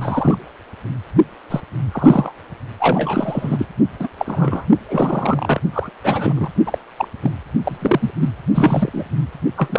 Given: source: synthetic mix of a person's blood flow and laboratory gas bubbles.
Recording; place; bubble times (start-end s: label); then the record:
Doppler ultrasound of blood flow; precordium
0.01-0.38 s: bubbles
1.51-1.60 s: bubbles
1.92-2.33 s: bubbles
2.79-3.67 s: bubbles
3.98-4.08 s: bubbles
4.17-4.65 s: bubbles
4.90-5.60 s: bubbles
5.72-5.89 s: bubbles
6.02-6.33 s: bubbles
6.35-6.49 s: bubbles
6.66-6.78 s: bubbles
6.97-7.08 s: bubbles
7.21-7.31 s: bubbles
7.63-8.11 s: bubbles
8.20-8.29 s: bubbles
8.54-8.90 s: bubbles
8.93-9.04 s: bubbles
9.56-9.79 s: bubbles
From the record:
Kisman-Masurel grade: 243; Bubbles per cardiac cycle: several, 3 to 8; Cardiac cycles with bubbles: 100%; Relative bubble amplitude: loud (0.450 to 0.775); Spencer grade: 3 (all of the cardiac periods contain showers or single bubble signals, but not dominating or overriding the cardiac motion signals); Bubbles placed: only in the low amplitude regions of the cardiac cycle